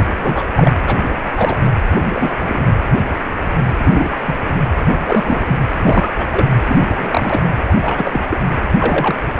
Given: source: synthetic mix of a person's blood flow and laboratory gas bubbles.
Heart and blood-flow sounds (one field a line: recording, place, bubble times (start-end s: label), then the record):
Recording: Doppler ultrasound of blood flow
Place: precordium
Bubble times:
0.17-0.43 s: bubbles
0.55-0.72 s: bubbles
0.86-0.98 s: bubbles
1.04-1.10 s: bubbles
1.34-1.59 s: bubbles
2.04-2.33 s: bubbles
2.42-2.62 s: bubbles
3.85-4.17 s: bubbles
4.25-4.35 s: bubbles
4.47-4.57 s: bubbles
4.95-5.61 s: bubbles
5.83-6.09 s: bubbles
6.18-6.26 s: bubbles
6.30-6.46 s: bubbles
6.68-6.79 s: bubbles
6.81-7.41 s: bubbles
7.68-7.77 s: bubbles
7.81-8.24 s: bubbles
8.29-8.38 s: bubbles
8.79-9.15 s: bubbles
9.36-9.40 s: bubbles
From the record:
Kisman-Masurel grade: 232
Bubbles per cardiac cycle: several, 3 to 8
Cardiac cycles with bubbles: 50 to 99%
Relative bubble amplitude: moderate (0.250 to 0.450)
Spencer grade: 3 (all of the cardiac periods contain showers or single bubble signals, but not dominating or overriding the cardiac motion signals)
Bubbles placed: anywhere in the cardiac cycle